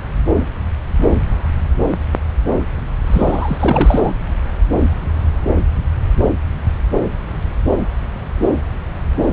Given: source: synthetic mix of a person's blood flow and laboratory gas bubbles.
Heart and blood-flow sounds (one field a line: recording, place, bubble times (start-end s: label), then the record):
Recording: Doppler ultrasound of blood flow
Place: subclavian vein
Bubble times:
3.06-4.13 s: bubbles
From the record:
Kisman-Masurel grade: 213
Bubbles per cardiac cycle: several, 3 to 8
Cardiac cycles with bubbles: 1 to 10%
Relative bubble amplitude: loud (0.450 to 0.775)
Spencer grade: 1 (occasional bubble signal discernible with the cardiac motion signal, with majority of cardiac periods free of bubbles)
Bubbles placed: anywhere in the cardiac cycle